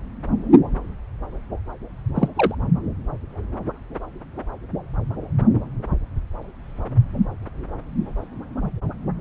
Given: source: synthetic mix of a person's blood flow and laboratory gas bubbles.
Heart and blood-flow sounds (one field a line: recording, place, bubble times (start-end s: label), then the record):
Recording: Doppler ultrasound of blood flow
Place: subclavian vein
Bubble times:
2.15-2.28 s: bubbles
2.35-2.55 s: bubbles
From the record:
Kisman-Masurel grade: 112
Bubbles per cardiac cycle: 1 to 2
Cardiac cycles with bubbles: 1 to 10%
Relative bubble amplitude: moderate (0.250 to 0.450)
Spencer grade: 1 (occasional bubble signal discernible with the cardiac motion signal, with majority of cardiac periods free of bubbles)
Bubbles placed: anywhere in the cardiac cycle